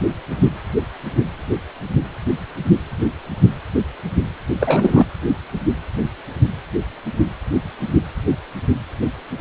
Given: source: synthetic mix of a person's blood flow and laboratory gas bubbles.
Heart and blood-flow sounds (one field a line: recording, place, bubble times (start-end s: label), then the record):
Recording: Doppler ultrasound of blood flow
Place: precordium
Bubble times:
4.60-5.06 s: bubbles
From the record:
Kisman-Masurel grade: 213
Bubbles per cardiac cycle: several, 3 to 8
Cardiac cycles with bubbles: 1 to 10%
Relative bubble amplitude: loud (0.450 to 0.775)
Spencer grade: 1 (occasional bubble signal discernible with the cardiac motion signal, with majority of cardiac periods free of bubbles)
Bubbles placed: anywhere in the cardiac cycle